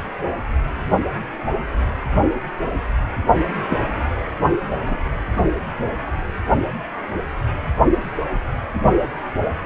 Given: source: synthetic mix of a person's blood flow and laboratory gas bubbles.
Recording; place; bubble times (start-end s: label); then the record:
Doppler ultrasound of blood flow; precordium
3.70-3.85 s: bubbles
4.86-4.98 s: bubbles
From the record:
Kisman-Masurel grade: 112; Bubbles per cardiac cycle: 1 to 2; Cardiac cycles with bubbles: 1 to 10%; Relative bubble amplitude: moderate (0.250 to 0.450); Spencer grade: 1 (occasional bubble signal discernible with the cardiac motion signal, with majority of cardiac periods free of bubbles); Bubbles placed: anywhere in the cardiac cycle